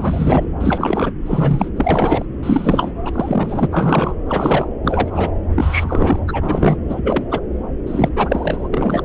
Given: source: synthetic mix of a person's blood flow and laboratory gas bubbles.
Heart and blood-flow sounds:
Doppler ultrasound of blood flow; subclavian vein
0.00-0.52 s: bubbles
0.60-1.11 s: bubbles
1.26-1.70 s: bubbles
1.76-2.25 s: bubbles
2.42-2.94 s: bubbles
3.04-3.66 s: bubbles
3.70-4.15 s: bubbles
4.27-4.68 s: bubbles
4.83-5.32 s: bubbles
5.54-6.20 s: bubbles
6.28-6.77 s: bubbles
6.89-7.24 s: bubbles
7.29-7.41 s: bubbles
7.87-8.09 s: bubbles
8.15-8.68 s: bubbles
8.72-9.05 s: bubbles
From the record:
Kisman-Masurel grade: 343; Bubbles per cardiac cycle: rolling drumbeat, 9 or more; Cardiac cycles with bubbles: 100%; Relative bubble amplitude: loud (0.450 to 0.775); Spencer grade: 3 (all of the cardiac periods contain showers or single bubble signals, but not dominating or overriding the cardiac motion signals); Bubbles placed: anywhere in the cardiac cycle

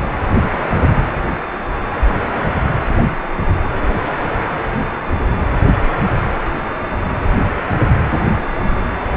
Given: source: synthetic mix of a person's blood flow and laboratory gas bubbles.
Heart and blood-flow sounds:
Doppler ultrasound of blood flow; precordium
no bubbles
From the record:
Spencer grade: 0 (complete lack of bubble signals)

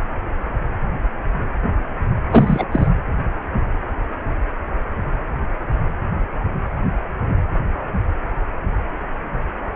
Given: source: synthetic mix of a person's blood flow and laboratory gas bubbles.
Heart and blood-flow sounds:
Doppler ultrasound of blood flow; precordium
2.31-2.65 s: bubbles
2.71-2.88 s: bubbles
From the record:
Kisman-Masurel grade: 213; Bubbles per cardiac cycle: several, 3 to 8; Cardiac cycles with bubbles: 1 to 10%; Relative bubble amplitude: loud (0.450 to 0.775); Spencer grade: 1 (occasional bubble signal discernible with the cardiac motion signal, with majority of cardiac periods free of bubbles); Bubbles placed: anywhere in the cardiac cycle

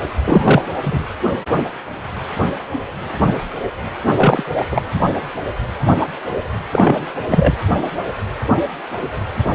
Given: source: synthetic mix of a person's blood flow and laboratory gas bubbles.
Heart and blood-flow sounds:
Doppler ultrasound of blood flow; precordium
0.26-0.62 s: bubbles
0.81-1.05 s: bubbles
4.17-4.44 s: bubbles
4.57-4.81 s: bubbles
6.72-7.07 s: bubbles
7.28-7.54 s: bubbles
From the record:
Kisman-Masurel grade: 223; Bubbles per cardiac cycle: several, 3 to 8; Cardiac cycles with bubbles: 10 to 50%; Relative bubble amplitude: loud (0.450 to 0.775); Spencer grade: 2 (many but less than half of the cardiac periods contain bubble signals, singularly or in groups); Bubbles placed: anywhere in the cardiac cycle

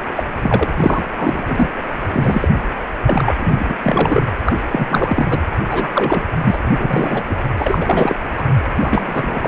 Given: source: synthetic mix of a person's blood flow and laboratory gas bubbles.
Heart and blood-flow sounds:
Doppler ultrasound of blood flow; precordium
0.00-0.03 s: bubbles
0.15-0.23 s: bubbles
0.43-0.69 s: bubbles
0.78-1.04 s: bubbles
1.17-1.69 s: bubbles
2.13-2.48 s: bubbles
3.06-3.75 s: bubbles
3.82-4.26 s: bubbles
4.44-4.54 s: bubbles
4.71-5.39 s: bubbles
5.64-6.28 s: bubbles
6.43-6.59 s: bubbles
6.63-7.23 s: bubbles
7.29-7.36 s: bubbles
7.58-8.15 s: bubbles
8.37-8.44 s: bubbles
8.82-9.48 s: bubbles
From the record:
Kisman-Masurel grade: 343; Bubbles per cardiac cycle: rolling drumbeat, 9 or more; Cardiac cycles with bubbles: 100%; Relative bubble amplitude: loud (0.450 to 0.775); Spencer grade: 3 (all of the cardiac periods contain showers or single bubble signals, but not dominating or overriding the cardiac motion signals); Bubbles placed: anywhere in the cardiac cycle

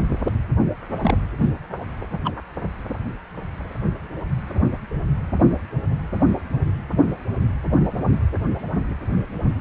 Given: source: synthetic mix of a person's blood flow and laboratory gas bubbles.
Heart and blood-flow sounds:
Doppler ultrasound of blood flow; precordium
1.01-1.15 s: bubbles
1.38-1.50 s: bubbles
2.10-2.19 s: bubbles
2.24-2.32 s: bubbles
From the record:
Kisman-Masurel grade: 212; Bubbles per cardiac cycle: several, 3 to 8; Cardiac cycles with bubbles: 1 to 10%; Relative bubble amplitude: moderate (0.250 to 0.450); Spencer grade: 1 (occasional bubble signal discernible with the cardiac motion signal, with majority of cardiac periods free of bubbles); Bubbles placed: anywhere in the cardiac cycle

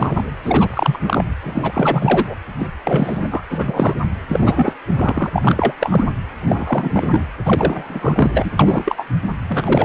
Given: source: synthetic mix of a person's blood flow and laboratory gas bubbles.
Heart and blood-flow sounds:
Doppler ultrasound of blood flow; precordium
0.00-0.24 s: bubbles
0.42-1.00 s: bubbles
1.06-1.24 s: bubbles
1.43-2.37 s: bubbles
2.59-2.67 s: bubbles
2.84-3.44 s: bubbles
3.50-3.94 s: bubbles
4.28-4.75 s: bubbles
4.92-5.29 s: bubbles
5.33-5.73 s: bubbles
5.81-6.06 s: bubbles
6.41-7.27 s: bubbles
7.45-8.51 s: bubbles
8.59-9.06 s: bubbles
9.48-9.85 s: bubbles
From the record:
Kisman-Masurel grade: 343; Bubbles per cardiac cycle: rolling drumbeat, 9 or more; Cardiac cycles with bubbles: 100%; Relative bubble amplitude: loud (0.450 to 0.775); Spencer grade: 3 (all of the cardiac periods contain showers or single bubble signals, but not dominating or overriding the cardiac motion signals); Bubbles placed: anywhere in the cardiac cycle

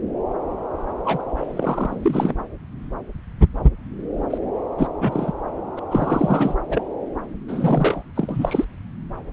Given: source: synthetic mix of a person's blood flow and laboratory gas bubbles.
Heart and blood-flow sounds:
Doppler ultrasound of blood flow; subclavian vein
1.05-1.22 s: bubbles
1.39-2.33 s: bubbles
4.30-4.38 s: bubbles
4.78-4.87 s: bubbles
5.00-5.33 s: bubbles
5.77-5.79 s: bubbles
5.91-6.54 s: bubbles
6.69-6.84 s: bubbles
7.48-8.03 s: bubbles
8.15-8.64 s: bubbles
From the record:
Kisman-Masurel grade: 332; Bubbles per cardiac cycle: rolling drumbeat, 9 or more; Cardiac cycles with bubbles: 50 to 99%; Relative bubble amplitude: moderate (0.250 to 0.450); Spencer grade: 3 (all of the cardiac periods contain showers or single bubble signals, but not dominating or overriding the cardiac motion signals); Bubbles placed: anywhere in the cardiac cycle

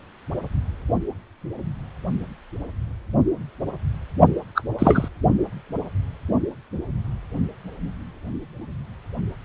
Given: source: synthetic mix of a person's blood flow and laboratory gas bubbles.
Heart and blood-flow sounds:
Doppler ultrasound of blood flow; precordium
4.55-4.62 s: bubbles
4.79-5.08 s: bubbles
From the record:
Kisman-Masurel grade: 213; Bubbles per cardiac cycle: several, 3 to 8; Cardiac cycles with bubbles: 1 to 10%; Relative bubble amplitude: loud (0.450 to 0.775); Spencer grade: 1 (occasional bubble signal discernible with the cardiac motion signal, with majority of cardiac periods free of bubbles); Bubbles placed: only in the low amplitude regions of the cardiac cycle

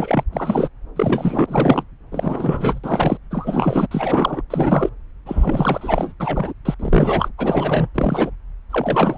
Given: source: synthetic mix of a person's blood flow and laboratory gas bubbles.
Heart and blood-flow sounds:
Doppler ultrasound of blood flow; subclavian vein
0.00-0.24 s: bubbles
0.31-0.68 s: bubbles
0.96-1.83 s: bubbles
2.11-2.80 s: bubbles
2.83-3.17 s: bubbles
3.30-3.87 s: bubbles
3.91-4.42 s: bubbles
4.50-4.89 s: bubbles
5.25-6.12 s: bubbles
6.20-6.54 s: bubbles
6.65-6.75 s: bubbles
6.79-7.29 s: bubbles
7.38-7.89 s: bubbles
7.95-8.30 s: bubbles
8.70-9.18 s: bubbles
From the record:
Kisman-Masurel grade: 343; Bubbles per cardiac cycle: rolling drumbeat, 9 or more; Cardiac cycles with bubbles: 100%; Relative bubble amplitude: loud (0.450 to 0.775); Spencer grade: 3 (all of the cardiac periods contain showers or single bubble signals, but not dominating or overriding the cardiac motion signals); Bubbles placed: anywhere in the cardiac cycle

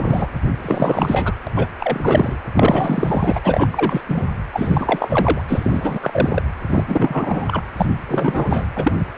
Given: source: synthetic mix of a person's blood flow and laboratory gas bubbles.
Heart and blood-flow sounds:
Doppler ultrasound of blood flow; precordium
0.00-0.29 s: bubbles
0.62-1.33 s: bubbles
1.47-1.49 s: bubbles
1.55-1.67 s: bubbles
1.80-2.36 s: bubbles
2.54-3.39 s: bubbles
3.44-3.68 s: bubbles
3.71-4.01 s: bubbles
4.08-4.24 s: bubbles
4.53-5.41 s: bubbles
5.47-5.99 s: bubbles
6.03-6.43 s: bubbles
6.69-6.84 s: bubbles
6.88-7.62 s: bubbles
7.77-7.86 s: bubbles
8.08-8.67 s: bubbles
8.76-8.95 s: bubbles
8.99-9.05 s: bubbles
From the record:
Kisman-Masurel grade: 343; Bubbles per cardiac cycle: rolling drumbeat, 9 or more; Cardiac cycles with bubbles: 100%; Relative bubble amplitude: loud (0.450 to 0.775); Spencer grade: 3 (all of the cardiac periods contain showers or single bubble signals, but not dominating or overriding the cardiac motion signals); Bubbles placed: anywhere in the cardiac cycle

